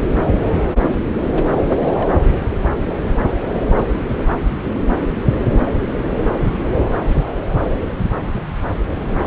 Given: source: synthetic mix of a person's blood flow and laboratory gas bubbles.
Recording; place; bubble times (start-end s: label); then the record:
Doppler ultrasound of blood flow; subclavian vein
1.65-1.72 s: bubbles
1.80-2.13 s: bubbles
From the record:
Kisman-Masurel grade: 211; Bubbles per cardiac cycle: several, 3 to 8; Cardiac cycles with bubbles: 1 to 10%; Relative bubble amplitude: barely perceptible (0.100 to 0.250); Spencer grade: 1 (occasional bubble signal discernible with the cardiac motion signal, with majority of cardiac periods free of bubbles); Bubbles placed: anywhere in the cardiac cycle